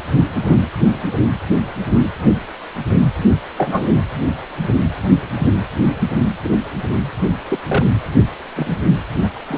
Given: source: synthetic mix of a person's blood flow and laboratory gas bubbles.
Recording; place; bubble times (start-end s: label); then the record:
Doppler ultrasound of blood flow; precordium
0.10-0.23 s: bubbles
0.48-0.57 s: bubbles
3.57-3.89 s: bubbles
6.44-6.58 s: bubbles
7.50-7.58 s: bubbles
7.67-7.85 s: bubbles
8.56-8.79 s: bubbles
9.23-9.29 s: bubbles
9.47-9.58 s: bubbles
From the record:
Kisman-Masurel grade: 122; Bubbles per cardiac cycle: 1 to 2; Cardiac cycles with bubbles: 10 to 50%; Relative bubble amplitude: moderate (0.250 to 0.450); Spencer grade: 2 (many but less than half of the cardiac periods contain bubble signals, singularly or in groups); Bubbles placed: anywhere in the cardiac cycle